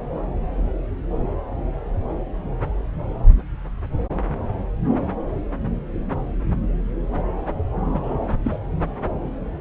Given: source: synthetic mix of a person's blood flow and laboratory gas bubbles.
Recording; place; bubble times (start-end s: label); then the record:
Doppler ultrasound of blood flow; subclavian vein
7.94-8.00 s: bubbles
8.03-8.35 s: bubbles
8.43-8.58 s: bubbles
From the record:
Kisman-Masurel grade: 121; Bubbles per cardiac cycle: 1 to 2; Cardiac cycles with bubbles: 10 to 50%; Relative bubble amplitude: barely perceptible (0.100 to 0.250); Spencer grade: 2 (many but less than half of the cardiac periods contain bubble signals, singularly or in groups); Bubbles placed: anywhere in the cardiac cycle